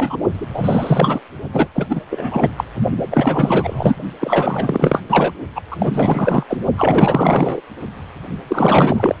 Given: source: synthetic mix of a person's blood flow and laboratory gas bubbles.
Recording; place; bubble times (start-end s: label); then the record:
Doppler ultrasound of blood flow; precordium
0.00-0.16 s: bubbles
0.38-1.21 s: bubbles
1.53-1.69 s: bubbles
1.73-2.01 s: bubbles
2.10-2.48 s: bubbles
2.57-2.65 s: bubbles
3.10-3.97 s: bubbles
4.21-5.03 s: bubbles
5.08-5.34 s: bubbles
5.55-5.62 s: bubbles
5.71-5.76 s: bubbles
5.78-6.43 s: bubbles
6.49-6.57 s: bubbles
6.78-7.61 s: bubbles
8.47-9.15 s: bubbles
From the record:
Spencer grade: 4 (maximum detectable bubble signal sounding continuously throughout systole and diastole of every cardiac period, and overriding the amplitude of the normal cardiac signals); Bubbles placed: only in the low amplitude regions of the cardiac cycle